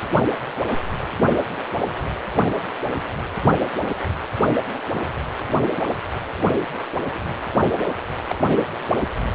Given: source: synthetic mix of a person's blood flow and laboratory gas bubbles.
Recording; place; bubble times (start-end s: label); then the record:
Doppler ultrasound of blood flow; precordium
8.28-8.36 s: bubbles
From the record:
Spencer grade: 1 (occasional bubble signal discernible with the cardiac motion signal, with majority of cardiac periods free of bubbles); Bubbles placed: anywhere in the cardiac cycle